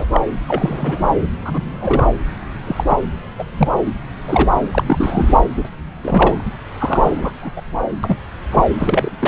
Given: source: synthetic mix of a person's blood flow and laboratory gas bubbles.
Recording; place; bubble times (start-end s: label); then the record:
Doppler ultrasound of blood flow; subclavian vein
0.00-0.06 s: bubbles
0.12-0.21 s: bubbles
0.48-1.14 s: bubbles
1.45-2.06 s: bubbles
2.67-2.84 s: bubbles
2.89-2.97 s: bubbles
3.39-3.44 s: bubbles
3.57-3.69 s: bubbles
4.28-4.50 s: bubbles
4.71-4.83 s: bubbles
4.86-5.38 s: bubbles
5.55-5.70 s: bubbles
6.03-6.44 s: bubbles
6.78-7.33 s: bubbles
7.42-7.51 s: bubbles
7.56-7.61 s: bubbles
8.03-8.16 s: bubbles
8.50-8.65 s: bubbles
8.78-9.15 s: bubbles
9.21-9.28 s: bubbles
From the record:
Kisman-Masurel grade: 243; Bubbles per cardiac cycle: several, 3 to 8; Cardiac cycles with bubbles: 100%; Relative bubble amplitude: loud (0.450 to 0.775); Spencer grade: 3 (all of the cardiac periods contain showers or single bubble signals, but not dominating or overriding the cardiac motion signals); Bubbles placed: anywhere in the cardiac cycle